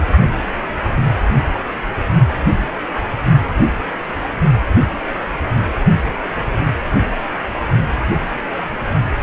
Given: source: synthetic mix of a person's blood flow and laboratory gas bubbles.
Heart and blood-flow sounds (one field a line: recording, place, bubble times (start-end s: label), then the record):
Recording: Doppler ultrasound of blood flow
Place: precordium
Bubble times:
0.00-0.03 s: bubbles
From the record:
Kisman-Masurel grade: 111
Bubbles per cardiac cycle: 1 to 2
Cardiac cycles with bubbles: 1 to 10%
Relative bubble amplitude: barely perceptible (0.100 to 0.250)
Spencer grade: 1 (occasional bubble signal discernible with the cardiac motion signal, with majority of cardiac periods free of bubbles)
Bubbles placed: only in the low amplitude regions of the cardiac cycle